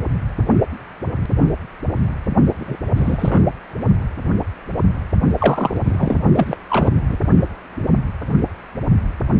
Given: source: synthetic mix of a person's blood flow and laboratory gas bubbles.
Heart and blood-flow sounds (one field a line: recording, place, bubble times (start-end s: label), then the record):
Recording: Doppler ultrasound of blood flow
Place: precordium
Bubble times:
2.58-2.77 s: bubbles
2.95-3.52 s: bubbles
5.38-5.77 s: bubbles
5.84-6.17 s: bubbles
6.36-6.57 s: bubbles
6.70-6.91 s: bubbles
7.08-7.17 s: bubbles
From the record:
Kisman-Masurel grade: 223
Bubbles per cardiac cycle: several, 3 to 8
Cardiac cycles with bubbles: 10 to 50%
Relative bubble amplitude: loud (0.450 to 0.775)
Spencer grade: 2 (many but less than half of the cardiac periods contain bubble signals, singularly or in groups)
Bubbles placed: only in the low amplitude regions of the cardiac cycle